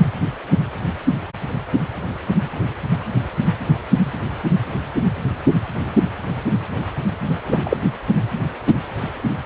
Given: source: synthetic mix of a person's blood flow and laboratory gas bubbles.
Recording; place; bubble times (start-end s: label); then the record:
Doppler ultrasound of blood flow; precordium
7.46-7.77 s: bubbles
From the record:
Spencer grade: 1 (occasional bubble signal discernible with the cardiac motion signal, with majority of cardiac periods free of bubbles); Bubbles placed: anywhere in the cardiac cycle